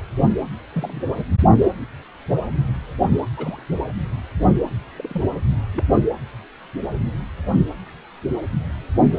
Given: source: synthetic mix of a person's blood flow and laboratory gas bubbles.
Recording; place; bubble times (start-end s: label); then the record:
Doppler ultrasound of blood flow; precordium
0.73-1.02 s: bubbles
3.37-3.62 s: bubbles
4.96-5.21 s: bubbles
5.74-5.85 s: bubbles
From the record:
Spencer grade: 2 (many but less than half of the cardiac periods contain bubble signals, singularly or in groups); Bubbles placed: only in the low amplitude regions of the cardiac cycle